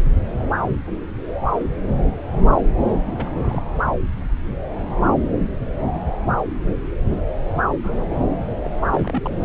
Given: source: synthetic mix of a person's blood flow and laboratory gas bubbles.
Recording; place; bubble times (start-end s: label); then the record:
Doppler ultrasound of blood flow; subclavian vein
2.97-3.64 s: bubbles
7.50-7.63 s: bubbles
7.83-8.06 s: bubbles
8.10-8.21 s: bubbles
8.65-8.69 s: bubbles
8.83-9.29 s: bubbles
From the record:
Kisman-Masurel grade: 221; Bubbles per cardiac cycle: several, 3 to 8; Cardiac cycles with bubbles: 10 to 50%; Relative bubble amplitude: barely perceptible (0.100 to 0.250); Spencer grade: 2 (many but less than half of the cardiac periods contain bubble signals, singularly or in groups); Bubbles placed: anywhere in the cardiac cycle